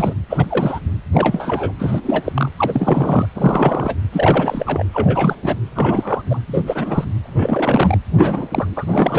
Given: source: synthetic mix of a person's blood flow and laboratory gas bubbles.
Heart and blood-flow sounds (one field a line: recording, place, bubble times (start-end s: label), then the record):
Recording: Doppler ultrasound of blood flow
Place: precordium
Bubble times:
0.00-0.14 s: bubbles
0.30-0.46 s: bubbles
0.49-0.79 s: bubbles
1.12-1.73 s: bubbles
1.79-2.32 s: bubbles
2.35-2.49 s: bubbles
2.56-3.26 s: bubbles
3.33-3.95 s: bubbles
4.12-4.85 s: bubbles
4.93-5.35 s: bubbles
5.43-5.57 s: bubbles
5.74-6.21 s: bubbles
6.29-6.39 s: bubbles
6.47-6.63 s: bubbles
6.67-7.04 s: bubbles
7.23-7.98 s: bubbles
8.13-8.48 s: bubbles
8.51-8.66 s: bubbles
8.76-9.19 s: bubbles
From the record:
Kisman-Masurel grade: 343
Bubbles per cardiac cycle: rolling drumbeat, 9 or more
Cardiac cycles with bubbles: 100%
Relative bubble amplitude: loud (0.450 to 0.775)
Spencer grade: 3 (all of the cardiac periods contain showers or single bubble signals, but not dominating or overriding the cardiac motion signals)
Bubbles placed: anywhere in the cardiac cycle